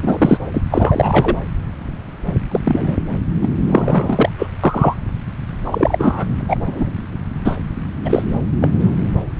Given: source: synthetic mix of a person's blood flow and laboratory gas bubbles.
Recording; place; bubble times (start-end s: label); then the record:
Doppler ultrasound of blood flow; subclavian vein
0.01-0.37 s: bubbles
0.53-0.62 s: bubbles
0.71-1.36 s: bubbles
2.50-2.97 s: bubbles
3.42-3.48 s: bubbles
3.69-4.29 s: bubbles
4.38-4.47 s: bubbles
4.63-4.96 s: bubbles
5.64-6.24 s: bubbles
6.39-6.42 s: bubbles
6.48-6.57 s: bubbles
6.65-6.93 s: bubbles
7.44-7.58 s: bubbles
8.04-8.23 s: bubbles
8.61-8.69 s: bubbles
8.79-8.90 s: bubbles
From the record:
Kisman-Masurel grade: 233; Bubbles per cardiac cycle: several, 3 to 8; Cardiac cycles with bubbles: 50 to 99%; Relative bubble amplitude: loud (0.450 to 0.775); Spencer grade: 3 (all of the cardiac periods contain showers or single bubble signals, but not dominating or overriding the cardiac motion signals); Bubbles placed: anywhere in the cardiac cycle